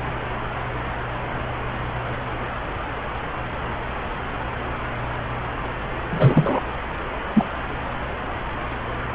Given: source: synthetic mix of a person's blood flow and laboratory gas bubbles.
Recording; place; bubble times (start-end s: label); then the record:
Doppler ultrasound of blood flow; subclavian vein
6.11-6.60 s: bubbles
7.33-7.45 s: bubbles
From the record:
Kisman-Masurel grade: 213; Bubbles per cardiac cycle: several, 3 to 8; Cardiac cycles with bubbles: 1 to 10%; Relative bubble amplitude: loud (0.450 to 0.775); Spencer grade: 1 (occasional bubble signal discernible with the cardiac motion signal, with majority of cardiac periods free of bubbles); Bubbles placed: anywhere in the cardiac cycle